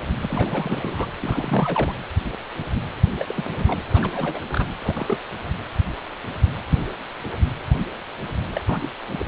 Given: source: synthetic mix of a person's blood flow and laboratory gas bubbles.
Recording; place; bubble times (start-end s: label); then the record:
Doppler ultrasound of blood flow; precordium
0.22-1.06 s: bubbles
1.21-1.94 s: bubbles
3.19-3.47 s: bubbles
3.55-3.82 s: bubbles
3.91-4.66 s: bubbles
4.82-5.18 s: bubbles
8.54-8.61 s: bubbles
8.66-8.90 s: bubbles
9.09-9.26 s: bubbles
From the record:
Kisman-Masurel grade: 221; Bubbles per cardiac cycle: several, 3 to 8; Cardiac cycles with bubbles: 10 to 50%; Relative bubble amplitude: barely perceptible (0.100 to 0.250); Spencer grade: 2 (many but less than half of the cardiac periods contain bubble signals, singularly or in groups); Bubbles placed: anywhere in the cardiac cycle